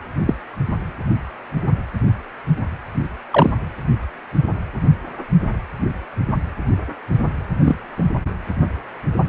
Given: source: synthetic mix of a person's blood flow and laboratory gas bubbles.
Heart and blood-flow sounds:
Doppler ultrasound of blood flow; precordium
0.26-0.34 s: bubbles
3.32-3.51 s: bubbles
7.61-7.76 s: bubbles
7.97-8.04 s: bubbles
From the record:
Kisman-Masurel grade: 123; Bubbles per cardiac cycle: 1 to 2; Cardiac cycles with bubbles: 10 to 50%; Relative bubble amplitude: loud (0.450 to 0.775); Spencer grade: 2 (many but less than half of the cardiac periods contain bubble signals, singularly or in groups); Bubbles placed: anywhere in the cardiac cycle

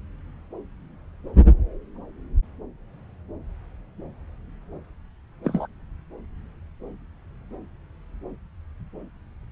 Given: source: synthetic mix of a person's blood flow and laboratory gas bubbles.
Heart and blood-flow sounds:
Doppler ultrasound of blood flow; subclavian vein
5.44-5.67 s: bubbles
From the record:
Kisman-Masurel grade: 112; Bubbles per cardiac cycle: 1 to 2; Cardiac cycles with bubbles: 1 to 10%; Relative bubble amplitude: moderate (0.250 to 0.450); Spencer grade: 1 (occasional bubble signal discernible with the cardiac motion signal, with majority of cardiac periods free of bubbles); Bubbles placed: anywhere in the cardiac cycle

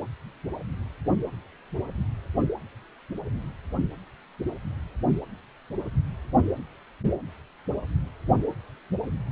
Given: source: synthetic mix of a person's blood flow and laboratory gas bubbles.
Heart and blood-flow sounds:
Doppler ultrasound of blood flow; precordium
no bubbles
From the record:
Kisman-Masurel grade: 000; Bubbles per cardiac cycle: 0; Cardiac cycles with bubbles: 0%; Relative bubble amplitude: no bubbles discernible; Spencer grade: 0 (complete lack of bubble signals)

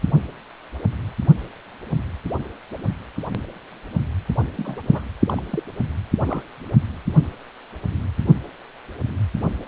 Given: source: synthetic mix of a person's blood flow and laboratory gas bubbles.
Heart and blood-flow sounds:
Doppler ultrasound of blood flow; precordium
4.57-4.81 s: bubbles
4.89-5.02 s: bubbles
5.26-5.42 s: bubbles
5.51-5.63 s: bubbles
6.25-6.42 s: bubbles
From the record:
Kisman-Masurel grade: 221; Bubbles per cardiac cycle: several, 3 to 8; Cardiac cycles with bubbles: 10 to 50%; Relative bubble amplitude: barely perceptible (0.100 to 0.250); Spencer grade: 2 (many but less than half of the cardiac periods contain bubble signals, singularly or in groups); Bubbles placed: only in the low amplitude regions of the cardiac cycle

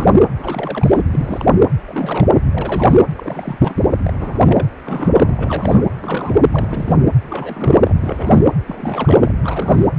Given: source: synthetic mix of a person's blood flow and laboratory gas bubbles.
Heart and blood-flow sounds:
Doppler ultrasound of blood flow; precordium
0.00-0.17 s: bubbles
0.37-1.02 s: bubbles
1.10-1.56 s: bubbles
1.84-2.42 s: bubbles
2.53-2.95 s: bubbles
3.16-3.60 s: bubbles
3.62-3.82 s: bubbles
4.03-4.13 s: bubbles
4.19-4.66 s: bubbles
4.85-5.88 s: bubbles
5.96-6.37 s: bubbles
6.50-7.08 s: bubbles
7.23-7.78 s: bubbles
7.84-7.93 s: bubbles
8.02-8.53 s: bubbles
8.67-9.31 s: bubbles
9.43-9.86 s: bubbles
From the record:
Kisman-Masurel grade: 342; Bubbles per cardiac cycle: rolling drumbeat, 9 or more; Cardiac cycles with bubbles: 100%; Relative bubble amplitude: moderate (0.250 to 0.450); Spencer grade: 3 (all of the cardiac periods contain showers or single bubble signals, but not dominating or overriding the cardiac motion signals); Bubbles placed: anywhere in the cardiac cycle

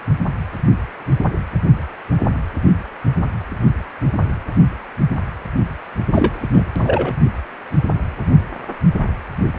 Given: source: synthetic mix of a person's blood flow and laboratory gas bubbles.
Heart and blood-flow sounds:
Doppler ultrasound of blood flow; precordium
6.12-6.49 s: bubbles
6.53-6.64 s: bubbles
6.75-7.14 s: bubbles
From the record:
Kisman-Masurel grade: 213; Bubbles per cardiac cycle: several, 3 to 8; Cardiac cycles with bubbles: 1 to 10%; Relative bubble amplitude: loud (0.450 to 0.775); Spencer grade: 1 (occasional bubble signal discernible with the cardiac motion signal, with majority of cardiac periods free of bubbles); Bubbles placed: only in the low amplitude regions of the cardiac cycle

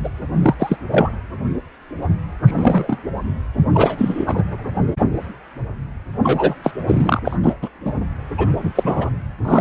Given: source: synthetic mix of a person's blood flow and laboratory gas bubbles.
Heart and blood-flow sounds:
Doppler ultrasound of blood flow; precordium
0.04-0.09 s: bubbles
0.42-0.54 s: bubbles
0.59-0.76 s: bubbles
0.91-1.11 s: bubbles
2.44-2.97 s: bubbles
3.73-4.43 s: bubbles
6.22-6.54 s: bubbles
6.63-6.71 s: bubbles
6.88-7.19 s: bubbles
7.25-7.36 s: bubbles
7.42-7.53 s: bubbles
7.62-7.68 s: bubbles
7.84-7.93 s: bubbles
8.37-8.47 s: bubbles
8.58-8.72 s: bubbles
8.75-9.10 s: bubbles
9.44-9.61 s: bubbles
From the record:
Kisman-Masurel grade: 233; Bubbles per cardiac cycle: several, 3 to 8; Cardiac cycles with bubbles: 50 to 99%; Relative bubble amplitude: loud (0.450 to 0.775); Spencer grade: 3 (all of the cardiac periods contain showers or single bubble signals, but not dominating or overriding the cardiac motion signals); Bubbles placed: anywhere in the cardiac cycle

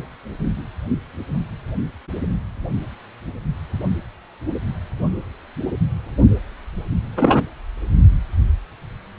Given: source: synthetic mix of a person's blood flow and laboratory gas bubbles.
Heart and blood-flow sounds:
Doppler ultrasound of blood flow; precordium
7.17-7.43 s: bubbles
From the record:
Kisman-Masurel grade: 123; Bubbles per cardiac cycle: 1 to 2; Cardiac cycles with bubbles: 10 to 50%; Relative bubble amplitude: loud (0.450 to 0.775); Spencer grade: 2 (many but less than half of the cardiac periods contain bubble signals, singularly or in groups); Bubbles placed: only in the low amplitude regions of the cardiac cycle

